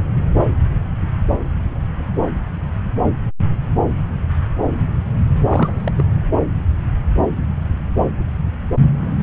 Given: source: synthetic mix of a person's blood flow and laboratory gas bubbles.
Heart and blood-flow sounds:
Doppler ultrasound of blood flow; subclavian vein
5.46-5.81 s: bubbles
5.84-5.92 s: bubbles
5.98-6.03 s: bubbles
From the record:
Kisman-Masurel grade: 212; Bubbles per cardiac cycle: several, 3 to 8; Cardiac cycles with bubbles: 1 to 10%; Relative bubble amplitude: moderate (0.250 to 0.450); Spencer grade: 1 (occasional bubble signal discernible with the cardiac motion signal, with majority of cardiac periods free of bubbles); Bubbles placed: anywhere in the cardiac cycle

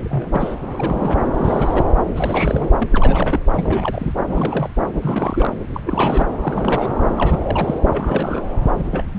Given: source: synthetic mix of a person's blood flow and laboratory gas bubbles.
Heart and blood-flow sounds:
Doppler ultrasound of blood flow; subclavian vein
0.04-0.55 s: bubbles
0.61-0.63 s: bubbles
0.70-1.19 s: bubbles
1.38-1.85 s: bubbles
2.15-2.70 s: bubbles
2.78-2.87 s: bubbles
2.91-3.39 s: bubbles
3.54-4.13 s: bubbles
4.27-4.68 s: bubbles
5.01-5.53 s: bubbles
5.73-5.80 s: bubbles
5.83-6.27 s: bubbles
6.40-6.96 s: bubbles
7.16-7.79 s: bubbles
7.89-8.45 s: bubbles
8.77-8.86 s: bubbles
8.90-9.04 s: bubbles
9.12-9.19 s: bubbles
From the record:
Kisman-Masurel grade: 342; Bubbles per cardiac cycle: rolling drumbeat, 9 or more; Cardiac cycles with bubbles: 100%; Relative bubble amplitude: moderate (0.250 to 0.450); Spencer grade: 3 (all of the cardiac periods contain showers or single bubble signals, but not dominating or overriding the cardiac motion signals); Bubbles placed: anywhere in the cardiac cycle

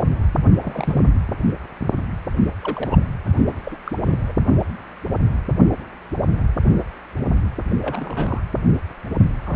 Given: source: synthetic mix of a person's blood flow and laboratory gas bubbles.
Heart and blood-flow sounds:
Doppler ultrasound of blood flow; precordium
0.62-1.09 s: bubbles
2.60-3.03 s: bubbles
3.46-3.53 s: bubbles
3.63-3.78 s: bubbles
3.84-3.92 s: bubbles
4.05-4.20 s: bubbles
4.27-4.33 s: bubbles
7.69-8.42 s: bubbles
9.46-9.56 s: bubbles
From the record:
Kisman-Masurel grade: 221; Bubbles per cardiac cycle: several, 3 to 8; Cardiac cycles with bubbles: 10 to 50%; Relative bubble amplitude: barely perceptible (0.100 to 0.250); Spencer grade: 2 (many but less than half of the cardiac periods contain bubble signals, singularly or in groups); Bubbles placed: anywhere in the cardiac cycle

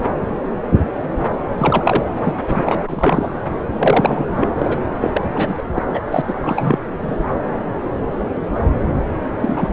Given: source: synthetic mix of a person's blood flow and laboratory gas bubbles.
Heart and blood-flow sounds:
Doppler ultrasound of blood flow; subclavian vein
1.58-2.12 s: bubbles
2.16-2.38 s: bubbles
2.48-3.27 s: bubbles
3.73-4.25 s: bubbles
4.37-4.50 s: bubbles
4.58-4.78 s: bubbles
5.00-5.21 s: bubbles
5.34-5.63 s: bubbles
5.75-5.83 s: bubbles
5.93-6.01 s: bubbles
6.11-6.21 s: bubbles
6.28-6.79 s: bubbles
7.02-7.25 s: bubbles
9.39-9.70 s: bubbles
From the record:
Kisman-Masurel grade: 333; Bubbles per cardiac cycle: rolling drumbeat, 9 or more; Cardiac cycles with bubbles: 50 to 99%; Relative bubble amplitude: loud (0.450 to 0.775); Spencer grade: 3 (all of the cardiac periods contain showers or single bubble signals, but not dominating or overriding the cardiac motion signals); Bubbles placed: anywhere in the cardiac cycle

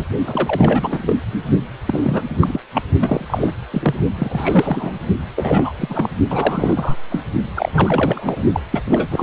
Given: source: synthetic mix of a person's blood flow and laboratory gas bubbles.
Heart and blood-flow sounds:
Doppler ultrasound of blood flow; precordium
0.00-0.04 s: bubbles
0.26-1.18 s: bubbles
1.88-2.22 s: bubbles
2.41-2.60 s: bubbles
2.74-2.82 s: bubbles
3.00-3.25 s: bubbles
3.28-3.54 s: bubbles
3.71-3.95 s: bubbles
4.18-4.92 s: bubbles
5.37-6.09 s: bubbles
6.29-6.96 s: bubbles
7.10-7.21 s: bubbles
7.54-8.44 s: bubbles
8.53-8.60 s: bubbles
8.71-8.81 s: bubbles
8.86-9.23 s: bubbles
From the record:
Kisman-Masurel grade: 342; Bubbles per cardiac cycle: rolling drumbeat, 9 or more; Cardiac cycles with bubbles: 100%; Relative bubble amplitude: moderate (0.250 to 0.450); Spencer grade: 3 (all of the cardiac periods contain showers or single bubble signals, but not dominating or overriding the cardiac motion signals); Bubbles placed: only in the low amplitude regions of the cardiac cycle

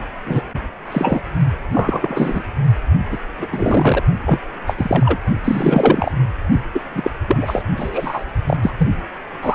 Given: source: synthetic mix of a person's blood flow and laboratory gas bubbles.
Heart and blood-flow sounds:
Doppler ultrasound of blood flow; precordium
0.25-0.42 s: bubbles
0.92-1.21 s: bubbles
1.74-2.43 s: bubbles
3.11-3.17 s: bubbles
3.39-3.47 s: bubbles
3.52-4.03 s: bubbles
4.25-4.39 s: bubbles
4.67-4.75 s: bubbles
4.77-5.18 s: bubbles
5.44-6.12 s: bubbles
6.75-6.81 s: bubbles
6.94-7.11 s: bubbles
7.28-7.63 s: bubbles
7.76-8.24 s: bubbles
8.46-8.56 s: bubbles
8.62-8.73 s: bubbles
8.78-8.90 s: bubbles
9.42-9.55 s: bubbles
From the record:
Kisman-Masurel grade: 233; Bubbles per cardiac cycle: several, 3 to 8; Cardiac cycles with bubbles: 50 to 99%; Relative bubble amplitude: loud (0.450 to 0.775); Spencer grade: 3 (all of the cardiac periods contain showers or single bubble signals, but not dominating or overriding the cardiac motion signals); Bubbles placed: only in the low amplitude regions of the cardiac cycle

